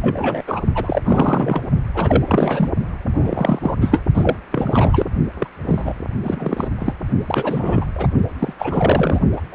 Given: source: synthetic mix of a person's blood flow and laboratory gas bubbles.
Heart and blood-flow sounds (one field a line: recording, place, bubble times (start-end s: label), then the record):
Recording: Doppler ultrasound of blood flow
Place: precordium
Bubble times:
0.01-0.43 s: bubbles
0.47-0.62 s: bubbles
0.74-1.65 s: bubbles
1.94-2.70 s: bubbles
3.16-3.76 s: bubbles
3.81-4.02 s: bubbles
4.14-4.36 s: bubbles
4.51-5.05 s: bubbles
5.33-5.48 s: bubbles
5.66-5.95 s: bubbles
6.23-6.68 s: bubbles
6.79-6.93 s: bubbles
7.25-7.85 s: bubbles
7.94-8.07 s: bubbles
8.39-8.53 s: bubbles
8.58-9.20 s: bubbles
9.33-9.41 s: bubbles
9.51-9.55 s: bubbles
From the record:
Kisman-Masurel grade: 343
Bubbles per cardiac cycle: rolling drumbeat, 9 or more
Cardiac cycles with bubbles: 100%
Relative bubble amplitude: loud (0.450 to 0.775)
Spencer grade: 3 (all of the cardiac periods contain showers or single bubble signals, but not dominating or overriding the cardiac motion signals)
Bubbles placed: only in the low amplitude regions of the cardiac cycle